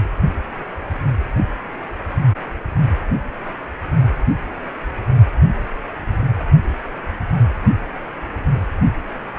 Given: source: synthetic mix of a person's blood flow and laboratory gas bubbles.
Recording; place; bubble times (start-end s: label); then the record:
Doppler ultrasound of blood flow; precordium
no bubbles
From the record:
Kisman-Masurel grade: 000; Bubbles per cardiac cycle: 0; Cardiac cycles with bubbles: 0%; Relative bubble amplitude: no bubbles discernible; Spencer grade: 0 (complete lack of bubble signals)